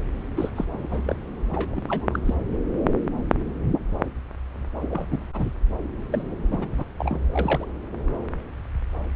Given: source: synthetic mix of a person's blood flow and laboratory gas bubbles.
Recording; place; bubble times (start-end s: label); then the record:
Doppler ultrasound of blood flow; subclavian vein
0.36-0.50 s: bubbles
0.55-0.64 s: bubbles
0.71-1.15 s: bubbles
1.50-1.84 s: bubbles
1.87-2.20 s: bubbles
2.25-2.34 s: bubbles
4.81-4.87 s: bubbles
4.89-5.07 s: bubbles
5.10-5.18 s: bubbles
5.33-5.53 s: bubbles
6.11-6.37 s: bubbles
6.51-6.73 s: bubbles
6.76-6.84 s: bubbles
6.97-7.21 s: bubbles
7.26-7.67 s: bubbles
From the record:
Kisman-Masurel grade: 232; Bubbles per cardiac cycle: several, 3 to 8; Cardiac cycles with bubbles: 50 to 99%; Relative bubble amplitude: moderate (0.250 to 0.450); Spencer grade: 3 (all of the cardiac periods contain showers or single bubble signals, but not dominating or overriding the cardiac motion signals); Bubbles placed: anywhere in the cardiac cycle